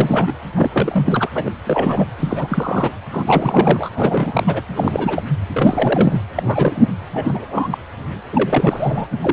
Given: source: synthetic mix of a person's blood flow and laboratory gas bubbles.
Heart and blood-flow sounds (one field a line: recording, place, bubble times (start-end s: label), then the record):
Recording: Doppler ultrasound of blood flow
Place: precordium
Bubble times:
0.00-0.33 s: bubbles
0.55-0.70 s: bubbles
0.73-1.29 s: bubbles
1.34-1.50 s: bubbles
1.65-2.06 s: bubbles
2.17-2.92 s: bubbles
3.10-3.89 s: bubbles
3.95-4.44 s: bubbles
4.47-4.62 s: bubbles
4.76-5.23 s: bubbles
5.54-6.20 s: bubbles
6.35-6.88 s: bubbles
7.14-7.45 s: bubbles
7.50-7.69 s: bubbles
7.71-7.78 s: bubbles
8.32-9.08 s: bubbles
9.21-9.33 s: bubbles
From the record:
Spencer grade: 3 (all of the cardiac periods contain showers or single bubble signals, but not dominating or overriding the cardiac motion signals)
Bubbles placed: anywhere in the cardiac cycle